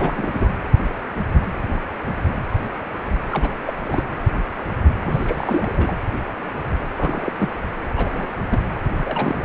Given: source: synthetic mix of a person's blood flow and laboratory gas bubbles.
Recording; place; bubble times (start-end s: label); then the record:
Doppler ultrasound of blood flow; precordium
0.00-0.48 s: bubbles
3.29-3.53 s: bubbles
3.65-3.74 s: bubbles
3.82-4.04 s: bubbles
5.04-5.96 s: bubbles
6.98-7.32 s: bubbles
7.38-7.49 s: bubbles
7.96-8.27 s: bubbles
8.49-8.59 s: bubbles
8.96-9.45 s: bubbles
From the record:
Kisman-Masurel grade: 232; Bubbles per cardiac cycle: several, 3 to 8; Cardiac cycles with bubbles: 50 to 99%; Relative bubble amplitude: moderate (0.250 to 0.450); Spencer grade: 3 (all of the cardiac periods contain showers or single bubble signals, but not dominating or overriding the cardiac motion signals); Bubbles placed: anywhere in the cardiac cycle